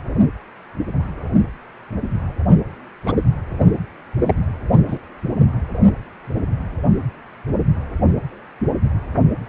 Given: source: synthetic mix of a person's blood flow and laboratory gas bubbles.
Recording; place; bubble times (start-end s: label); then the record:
Doppler ultrasound of blood flow; precordium
3.05-3.13 s: bubbles
4.26-4.34 s: bubbles
4.87-4.99 s: bubbles
From the record:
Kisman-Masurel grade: 122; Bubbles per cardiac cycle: 1 to 2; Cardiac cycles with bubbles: 10 to 50%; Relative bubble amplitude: moderate (0.250 to 0.450); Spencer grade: 2 (many but less than half of the cardiac periods contain bubble signals, singularly or in groups); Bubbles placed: only in the low amplitude regions of the cardiac cycle